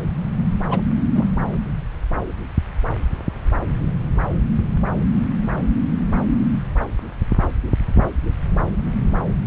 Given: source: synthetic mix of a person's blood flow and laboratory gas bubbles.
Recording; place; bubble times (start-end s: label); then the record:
Doppler ultrasound of blood flow; subclavian vein
0.69-0.81 s: bubbles
1.15-1.24 s: bubbles
From the record:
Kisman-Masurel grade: 112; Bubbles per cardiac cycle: 1 to 2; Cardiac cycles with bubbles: 1 to 10%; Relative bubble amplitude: moderate (0.250 to 0.450); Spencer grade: 1 (occasional bubble signal discernible with the cardiac motion signal, with majority of cardiac periods free of bubbles); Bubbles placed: anywhere in the cardiac cycle